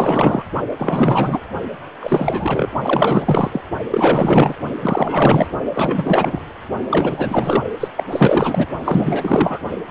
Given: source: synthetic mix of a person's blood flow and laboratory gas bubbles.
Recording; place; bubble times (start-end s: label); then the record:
Doppler ultrasound of blood flow; precordium
0.00-0.43 s: bubbles
0.77-1.40 s: bubbles
2.00-2.69 s: bubbles
2.81-3.61 s: bubbles
3.90-4.54 s: bubbles
4.80-5.48 s: bubbles
5.72-6.40 s: bubbles
6.91-7.64 s: bubbles
7.79-7.88 s: bubbles
7.96-8.04 s: bubbles
8.10-8.67 s: bubbles
8.84-9.60 s: bubbles
9.87-9.91 s: bubbles
From the record:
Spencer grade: 4 (maximum detectable bubble signal sounding continuously throughout systole and diastole of every cardiac period, and overriding the amplitude of the normal cardiac signals); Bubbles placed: only in the low amplitude regions of the cardiac cycle